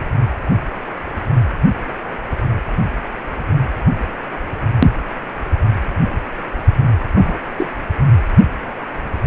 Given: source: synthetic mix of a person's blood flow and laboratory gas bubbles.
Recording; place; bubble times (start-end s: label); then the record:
Doppler ultrasound of blood flow; precordium
7.13-7.39 s: bubbles
7.58-7.70 s: bubbles
From the record:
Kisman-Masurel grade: 112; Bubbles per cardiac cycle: 1 to 2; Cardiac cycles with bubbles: 1 to 10%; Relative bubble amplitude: moderate (0.250 to 0.450); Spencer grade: 1 (occasional bubble signal discernible with the cardiac motion signal, with majority of cardiac periods free of bubbles); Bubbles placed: anywhere in the cardiac cycle